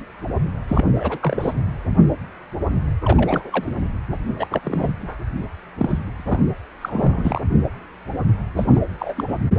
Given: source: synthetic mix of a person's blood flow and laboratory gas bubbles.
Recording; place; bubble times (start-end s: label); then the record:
Doppler ultrasound of blood flow; precordium
0.67-0.87 s: bubbles
0.95-1.19 s: bubbles
1.22-1.53 s: bubbles
3.04-3.64 s: bubbles
3.67-3.71 s: bubbles
4.39-4.47 s: bubbles
4.51-4.61 s: bubbles
4.63-4.92 s: bubbles
5.00-5.17 s: bubbles
5.78-5.99 s: bubbles
6.17-6.55 s: bubbles
6.81-7.42 s: bubbles
8.57-8.66 s: bubbles
8.70-8.80 s: bubbles
8.99-9.24 s: bubbles
9.29-9.36 s: bubbles
From the record:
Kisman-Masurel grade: 232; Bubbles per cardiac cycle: several, 3 to 8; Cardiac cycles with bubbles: 50 to 99%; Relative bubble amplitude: moderate (0.250 to 0.450); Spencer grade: 3 (all of the cardiac periods contain showers or single bubble signals, but not dominating or overriding the cardiac motion signals); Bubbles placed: anywhere in the cardiac cycle